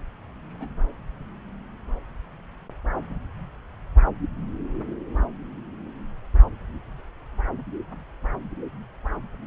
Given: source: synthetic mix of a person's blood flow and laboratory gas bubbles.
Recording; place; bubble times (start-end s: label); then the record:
Doppler ultrasound of blood flow; subclavian vein
0.52-0.68 s: bubbles
From the record:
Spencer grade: 1 (occasional bubble signal discernible with the cardiac motion signal, with majority of cardiac periods free of bubbles); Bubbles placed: anywhere in the cardiac cycle